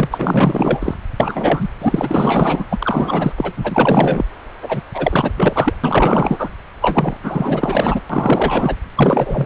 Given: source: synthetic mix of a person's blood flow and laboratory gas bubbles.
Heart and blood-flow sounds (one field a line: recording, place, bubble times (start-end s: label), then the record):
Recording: Doppler ultrasound of blood flow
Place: subclavian vein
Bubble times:
0.00-0.94 s: bubbles
1.20-1.68 s: bubbles
1.81-2.66 s: bubbles
2.70-3.33 s: bubbles
3.37-3.52 s: bubbles
3.56-4.25 s: bubbles
4.62-4.83 s: bubbles
4.94-5.32 s: bubbles
5.37-5.73 s: bubbles
5.83-6.49 s: bubbles
6.81-7.17 s: bubbles
7.22-8.00 s: bubbles
8.10-8.76 s: bubbles
8.95-9.46 s: bubbles
From the record:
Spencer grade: 4 (maximum detectable bubble signal sounding continuously throughout systole and diastole of every cardiac period, and overriding the amplitude of the normal cardiac signals)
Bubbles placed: anywhere in the cardiac cycle